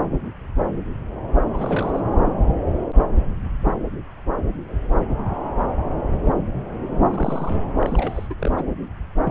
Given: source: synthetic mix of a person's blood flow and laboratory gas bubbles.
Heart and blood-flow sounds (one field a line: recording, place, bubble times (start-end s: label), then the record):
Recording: Doppler ultrasound of blood flow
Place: subclavian vein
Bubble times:
1.53-2.00 s: bubbles
7.04-7.57 s: bubbles
7.81-8.27 s: bubbles
8.29-8.34 s: bubbles
8.39-8.52 s: bubbles
8.57-8.64 s: bubbles
9.23-9.31 s: bubbles
From the record:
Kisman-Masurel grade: 221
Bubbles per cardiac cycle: several, 3 to 8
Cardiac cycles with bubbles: 10 to 50%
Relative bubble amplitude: barely perceptible (0.100 to 0.250)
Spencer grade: 2 (many but less than half of the cardiac periods contain bubble signals, singularly or in groups)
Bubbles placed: anywhere in the cardiac cycle